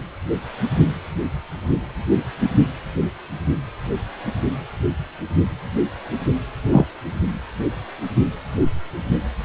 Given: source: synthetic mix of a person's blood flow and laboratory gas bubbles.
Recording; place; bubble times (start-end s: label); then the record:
Doppler ultrasound of blood flow; precordium
6.65-6.85 s: bubbles
From the record:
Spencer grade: 1 (occasional bubble signal discernible with the cardiac motion signal, with majority of cardiac periods free of bubbles); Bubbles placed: anywhere in the cardiac cycle